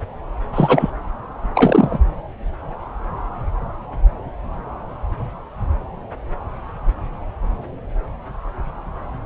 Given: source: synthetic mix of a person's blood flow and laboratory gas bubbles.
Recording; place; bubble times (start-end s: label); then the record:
Doppler ultrasound of blood flow; subclavian vein
0.53-0.90 s: bubbles
1.54-1.99 s: bubbles
From the record:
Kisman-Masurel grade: 213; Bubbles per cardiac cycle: several, 3 to 8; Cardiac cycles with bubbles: 1 to 10%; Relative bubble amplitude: loud (0.450 to 0.775); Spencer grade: 1 (occasional bubble signal discernible with the cardiac motion signal, with majority of cardiac periods free of bubbles); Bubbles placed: anywhere in the cardiac cycle